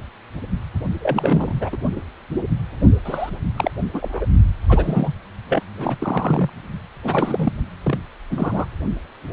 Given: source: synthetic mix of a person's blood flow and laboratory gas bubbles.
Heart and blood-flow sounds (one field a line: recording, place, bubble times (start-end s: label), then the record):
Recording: Doppler ultrasound of blood flow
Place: precordium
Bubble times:
1.00-1.54 s: bubbles
1.61-1.78 s: bubbles
3.05-3.29 s: bubbles
3.56-3.71 s: bubbles
3.93-4.26 s: bubbles
4.68-5.14 s: bubbles
5.48-5.62 s: bubbles
5.77-5.96 s: bubbles
5.99-6.50 s: bubbles
7.04-7.52 s: bubbles
7.83-7.99 s: bubbles
8.30-8.65 s: bubbles
From the record:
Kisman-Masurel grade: 232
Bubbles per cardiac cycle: several, 3 to 8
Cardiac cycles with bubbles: 50 to 99%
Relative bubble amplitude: moderate (0.250 to 0.450)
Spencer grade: 3 (all of the cardiac periods contain showers or single bubble signals, but not dominating or overriding the cardiac motion signals)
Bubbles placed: only in the low amplitude regions of the cardiac cycle